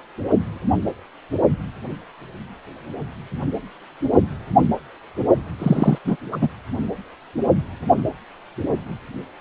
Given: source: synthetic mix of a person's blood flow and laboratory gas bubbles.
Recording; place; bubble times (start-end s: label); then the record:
Doppler ultrasound of blood flow; precordium
5.58-5.98 s: bubbles
6.04-6.17 s: bubbles
6.31-6.37 s: bubbles
6.41-6.49 s: bubbles
From the record:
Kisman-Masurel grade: 223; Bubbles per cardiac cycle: several, 3 to 8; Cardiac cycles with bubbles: 10 to 50%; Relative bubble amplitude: loud (0.450 to 0.775); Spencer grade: 2 (many but less than half of the cardiac periods contain bubble signals, singularly or in groups); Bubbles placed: only in the low amplitude regions of the cardiac cycle